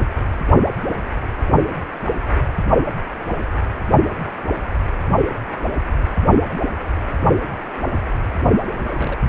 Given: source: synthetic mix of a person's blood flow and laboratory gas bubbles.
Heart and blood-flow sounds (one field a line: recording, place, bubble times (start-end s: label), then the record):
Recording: Doppler ultrasound of blood flow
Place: precordium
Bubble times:
8.82-9.17 s: bubbles
From the record:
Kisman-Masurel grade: 111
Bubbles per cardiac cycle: 1 to 2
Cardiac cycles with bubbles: 1 to 10%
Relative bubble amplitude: barely perceptible (0.100 to 0.250)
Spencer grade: 1 (occasional bubble signal discernible with the cardiac motion signal, with majority of cardiac periods free of bubbles)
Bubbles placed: only in the low amplitude regions of the cardiac cycle